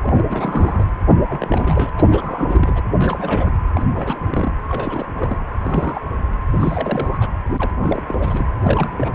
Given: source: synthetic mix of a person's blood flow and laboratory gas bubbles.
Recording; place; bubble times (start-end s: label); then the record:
Doppler ultrasound of blood flow; precordium
0.02-0.24 s: bubbles
0.27-0.85 s: bubbles
1.08-1.15 s: bubbles
1.29-1.92 s: bubbles
1.97-2.82 s: bubbles
2.98-3.52 s: bubbles
3.74-3.84 s: bubbles
3.89-4.52 s: bubbles
4.68-5.39 s: bubbles
5.58-6.01 s: bubbles
6.52-7.29 s: bubbles
7.58-7.71 s: bubbles
7.80-8.03 s: bubbles
8.07-8.46 s: bubbles
8.62-9.13 s: bubbles
From the record:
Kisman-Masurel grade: 342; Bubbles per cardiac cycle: rolling drumbeat, 9 or more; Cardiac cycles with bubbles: 100%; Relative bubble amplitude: moderate (0.250 to 0.450); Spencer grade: 3 (all of the cardiac periods contain showers or single bubble signals, but not dominating or overriding the cardiac motion signals); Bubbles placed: anywhere in the cardiac cycle